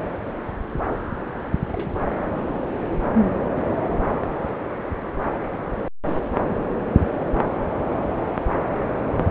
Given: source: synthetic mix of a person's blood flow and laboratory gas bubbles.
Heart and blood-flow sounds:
Doppler ultrasound of blood flow; subclavian vein
1.67-2.00 s: bubbles
2.07-2.15 s: bubbles
From the record:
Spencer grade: 1 (occasional bubble signal discernible with the cardiac motion signal, with majority of cardiac periods free of bubbles); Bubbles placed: anywhere in the cardiac cycle

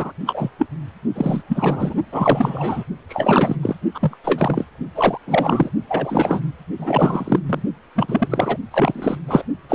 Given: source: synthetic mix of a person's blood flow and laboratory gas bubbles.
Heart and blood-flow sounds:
Doppler ultrasound of blood flow; precordium
0.00-0.12 s: bubbles
0.26-0.51 s: bubbles
0.58-0.66 s: bubbles
1.15-1.42 s: bubbles
1.48-1.94 s: bubbles
2.12-2.84 s: bubbles
3.08-3.56 s: bubbles
3.62-3.75 s: bubbles
3.94-4.16 s: bubbles
4.24-4.65 s: bubbles
4.95-5.18 s: bubbles
5.27-5.70 s: bubbles
5.88-6.40 s: bubbles
6.79-7.40 s: bubbles
7.46-7.62 s: bubbles
7.95-8.57 s: bubbles
8.71-9.18 s: bubbles
9.28-9.44 s: bubbles
9.69-9.75 s: bubbles
From the record:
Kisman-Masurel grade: 343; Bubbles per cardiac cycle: rolling drumbeat, 9 or more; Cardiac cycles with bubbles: 100%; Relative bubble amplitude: loud (0.450 to 0.775); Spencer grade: 3 (all of the cardiac periods contain showers or single bubble signals, but not dominating or overriding the cardiac motion signals); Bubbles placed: only in the low amplitude regions of the cardiac cycle

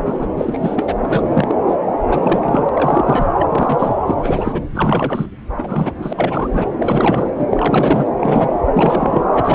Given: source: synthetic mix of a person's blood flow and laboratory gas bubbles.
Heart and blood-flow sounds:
Doppler ultrasound of blood flow; subclavian vein
0.05-0.27 s: bubbles
0.37-0.94 s: bubbles
1.03-1.55 s: bubbles
1.68-1.75 s: bubbles
2.07-2.69 s: bubbles
2.73-3.29 s: bubbles
3.38-3.95 s: bubbles
4.06-4.15 s: bubbles
4.22-4.62 s: bubbles
4.75-5.26 s: bubbles
5.58-5.95 s: bubbles
5.98-6.13 s: bubbles
6.17-6.48 s: bubbles
6.51-6.67 s: bubbles
6.79-7.46 s: bubbles
7.50-8.07 s: bubbles
8.21-8.58 s: bubbles
8.74-9.24 s: bubbles
9.34-9.55 s: bubbles
From the record:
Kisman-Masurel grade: 342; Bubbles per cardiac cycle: rolling drumbeat, 9 or more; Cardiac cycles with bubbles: 100%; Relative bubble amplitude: moderate (0.250 to 0.450); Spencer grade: 3 (all of the cardiac periods contain showers or single bubble signals, but not dominating or overriding the cardiac motion signals); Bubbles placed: anywhere in the cardiac cycle

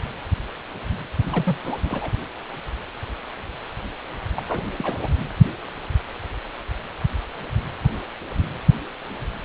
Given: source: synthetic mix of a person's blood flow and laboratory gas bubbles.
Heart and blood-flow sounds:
Doppler ultrasound of blood flow; precordium
1.23-1.58 s: bubbles
1.65-1.77 s: bubbles
1.83-2.12 s: bubbles
4.35-4.41 s: bubbles
4.46-4.63 s: bubbles
4.78-4.97 s: bubbles
5.03-5.09 s: bubbles
From the record:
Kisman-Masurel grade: 221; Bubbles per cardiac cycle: several, 3 to 8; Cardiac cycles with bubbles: 10 to 50%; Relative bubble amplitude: barely perceptible (0.100 to 0.250); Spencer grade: 2 (many but less than half of the cardiac periods contain bubble signals, singularly or in groups); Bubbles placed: only in the low amplitude regions of the cardiac cycle

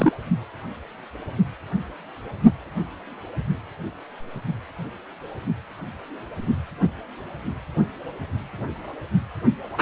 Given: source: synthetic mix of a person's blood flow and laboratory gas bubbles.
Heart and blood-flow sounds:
Doppler ultrasound of blood flow; precordium
0.00-0.12 s: bubbles
From the record:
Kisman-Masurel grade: 212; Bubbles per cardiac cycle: several, 3 to 8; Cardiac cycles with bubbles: 1 to 10%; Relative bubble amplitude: moderate (0.250 to 0.450); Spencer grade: 1 (occasional bubble signal discernible with the cardiac motion signal, with majority of cardiac periods free of bubbles); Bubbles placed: only in the low amplitude regions of the cardiac cycle

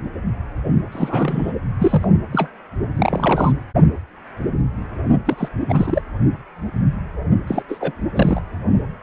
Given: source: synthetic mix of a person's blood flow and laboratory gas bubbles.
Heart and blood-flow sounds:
Doppler ultrasound of blood flow; precordium
0.92-1.53 s: bubbles
1.79-2.06 s: bubbles
2.31-2.50 s: bubbles
2.82-2.89 s: bubbles
2.96-3.52 s: bubbles
5.25-5.48 s: bubbles
5.69-6.02 s: bubbles
7.47-7.62 s: bubbles
7.68-7.93 s: bubbles
8.14-8.40 s: bubbles
From the record:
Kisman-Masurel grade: 332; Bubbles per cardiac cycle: rolling drumbeat, 9 or more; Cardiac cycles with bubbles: 50 to 99%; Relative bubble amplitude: moderate (0.250 to 0.450); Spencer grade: 3 (all of the cardiac periods contain showers or single bubble signals, but not dominating or overriding the cardiac motion signals); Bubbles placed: only in the low amplitude regions of the cardiac cycle

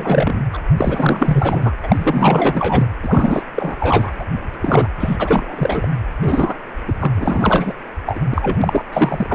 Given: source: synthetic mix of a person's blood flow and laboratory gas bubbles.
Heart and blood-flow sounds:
Doppler ultrasound of blood flow; precordium
0.00-0.45 s: bubbles
0.53-0.58 s: bubbles
0.76-1.73 s: bubbles
1.83-2.86 s: bubbles
3.02-3.42 s: bubbles
3.54-4.25 s: bubbles
4.62-4.88 s: bubbles
4.99-5.88 s: bubbles
6.20-6.54 s: bubbles
6.88-6.93 s: bubbles
6.99-7.11 s: bubbles
7.16-7.74 s: bubbles
8.06-8.20 s: bubbles
8.30-8.85 s: bubbles
8.93-9.35 s: bubbles
From the record:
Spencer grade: 4 (maximum detectable bubble signal sounding continuously throughout systole and diastole of every cardiac period, and overriding the amplitude of the normal cardiac signals); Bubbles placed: anywhere in the cardiac cycle

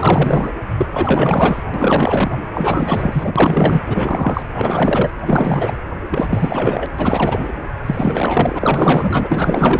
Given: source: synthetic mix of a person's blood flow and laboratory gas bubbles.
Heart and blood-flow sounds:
Doppler ultrasound of blood flow; precordium
0.00-0.51 s: bubbles
0.78-0.86 s: bubbles
0.92-1.64 s: bubbles
1.74-2.38 s: bubbles
2.54-3.32 s: bubbles
3.35-3.81 s: bubbles
3.88-4.43 s: bubbles
4.53-5.10 s: bubbles
5.26-5.74 s: bubbles
6.10-6.87 s: bubbles
6.97-7.53 s: bubbles
7.86-9.79 s: bubbles
From the record:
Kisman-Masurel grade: 444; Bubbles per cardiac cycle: continuous sound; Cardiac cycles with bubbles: 100%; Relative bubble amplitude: maximal (0.775 to 0.999); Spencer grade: 4 (maximum detectable bubble signal sounding continuously throughout systole and diastole of every cardiac period, and overriding the amplitude of the normal cardiac signals); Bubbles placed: anywhere in the cardiac cycle

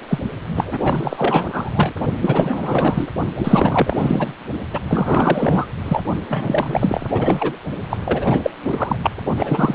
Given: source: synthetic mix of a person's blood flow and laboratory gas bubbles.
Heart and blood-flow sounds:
Doppler ultrasound of blood flow; precordium
0.08-0.19 s: bubbles
0.55-1.94 s: bubbles
2.21-3.08 s: bubbles
3.39-4.35 s: bubbles
4.73-4.79 s: bubbles
4.88-5.67 s: bubbles
5.84-6.00 s: bubbles
6.29-7.53 s: bubbles
7.89-8.50 s: bubbles
8.64-8.96 s: bubbles
9.03-9.11 s: bubbles
9.36-9.75 s: bubbles
From the record:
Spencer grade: 4 (maximum detectable bubble signal sounding continuously throughout systole and diastole of every cardiac period, and overriding the amplitude of the normal cardiac signals); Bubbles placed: only in the low amplitude regions of the cardiac cycle

